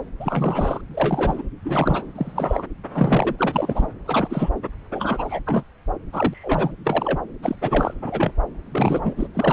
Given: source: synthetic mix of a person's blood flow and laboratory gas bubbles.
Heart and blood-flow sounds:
Doppler ultrasound of blood flow; subclavian vein
0.20-0.81 s: bubbles
0.90-1.44 s: bubbles
1.65-2.09 s: bubbles
2.15-2.65 s: bubbles
2.94-3.35 s: bubbles
3.38-3.86 s: bubbles
4.06-4.50 s: bubbles
4.93-5.40 s: bubbles
5.47-5.63 s: bubbles
6.12-6.73 s: bubbles
6.84-7.20 s: bubbles
7.43-7.56 s: bubbles
7.61-7.93 s: bubbles
8.01-8.31 s: bubbles
8.71-9.27 s: bubbles
9.34-9.53 s: bubbles
From the record:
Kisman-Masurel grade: 242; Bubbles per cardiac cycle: several, 3 to 8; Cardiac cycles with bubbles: 100%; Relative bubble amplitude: moderate (0.250 to 0.450); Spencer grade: 3 (all of the cardiac periods contain showers or single bubble signals, but not dominating or overriding the cardiac motion signals); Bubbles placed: anywhere in the cardiac cycle

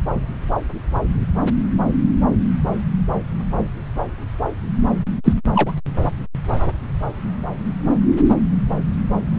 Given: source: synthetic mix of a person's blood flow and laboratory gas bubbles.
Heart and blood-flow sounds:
Doppler ultrasound of blood flow; subclavian vein
5.24-5.33 s: bubbles
5.54-5.72 s: bubbles
From the record:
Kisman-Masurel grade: 113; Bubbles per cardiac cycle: 1 to 2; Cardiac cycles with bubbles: 1 to 10%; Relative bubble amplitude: loud (0.450 to 0.775); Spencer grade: 1 (occasional bubble signal discernible with the cardiac motion signal, with majority of cardiac periods free of bubbles); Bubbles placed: anywhere in the cardiac cycle

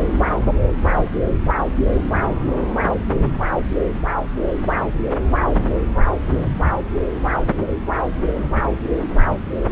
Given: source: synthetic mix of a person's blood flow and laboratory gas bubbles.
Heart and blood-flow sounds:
Doppler ultrasound of blood flow; subclavian vein
0.32-0.40 s: bubbles
8.34-8.41 s: bubbles
From the record:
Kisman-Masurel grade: 121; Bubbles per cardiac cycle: 1 to 2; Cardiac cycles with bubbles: 10 to 50%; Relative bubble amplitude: barely perceptible (0.100 to 0.250); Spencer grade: 2 (many but less than half of the cardiac periods contain bubble signals, singularly or in groups); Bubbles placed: anywhere in the cardiac cycle

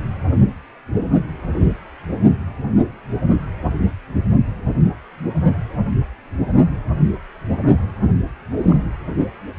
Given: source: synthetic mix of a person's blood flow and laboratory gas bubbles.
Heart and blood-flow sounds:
Doppler ultrasound of blood flow; precordium
8.70-8.76 s: bubbles
From the record:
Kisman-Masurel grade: 111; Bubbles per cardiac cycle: 1 to 2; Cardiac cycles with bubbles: 1 to 10%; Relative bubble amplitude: barely perceptible (0.100 to 0.250); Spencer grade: 1 (occasional bubble signal discernible with the cardiac motion signal, with majority of cardiac periods free of bubbles); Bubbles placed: only in the low amplitude regions of the cardiac cycle

